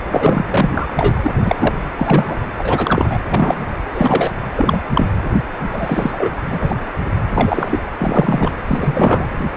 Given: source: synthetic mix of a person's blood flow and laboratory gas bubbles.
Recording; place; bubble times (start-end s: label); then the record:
Doppler ultrasound of blood flow; precordium
0.11-0.43 s: bubbles
0.49-0.90 s: bubbles
0.96-1.31 s: bubbles
1.45-1.75 s: bubbles
1.96-2.35 s: bubbles
2.58-3.18 s: bubbles
3.30-3.64 s: bubbles
3.93-4.31 s: bubbles
4.56-4.81 s: bubbles
4.93-5.10 s: bubbles
5.71-6.30 s: bubbles
6.47-6.76 s: bubbles
7.31-7.81 s: bubbles
7.99-8.57 s: bubbles
8.67-9.27 s: bubbles
From the record:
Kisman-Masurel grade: 233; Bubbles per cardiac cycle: several, 3 to 8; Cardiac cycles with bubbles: 50 to 99%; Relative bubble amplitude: loud (0.450 to 0.775); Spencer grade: 3 (all of the cardiac periods contain showers or single bubble signals, but not dominating or overriding the cardiac motion signals); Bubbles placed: anywhere in the cardiac cycle